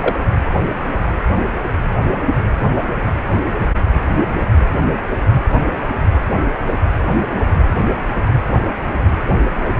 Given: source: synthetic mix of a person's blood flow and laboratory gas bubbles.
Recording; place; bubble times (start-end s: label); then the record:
Doppler ultrasound of blood flow; precordium
0.01-0.15 s: bubbles
From the record:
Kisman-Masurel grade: 113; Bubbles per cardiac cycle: 1 to 2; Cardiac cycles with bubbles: 1 to 10%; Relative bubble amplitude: loud (0.450 to 0.775); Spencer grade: 1 (occasional bubble signal discernible with the cardiac motion signal, with majority of cardiac periods free of bubbles); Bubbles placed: anywhere in the cardiac cycle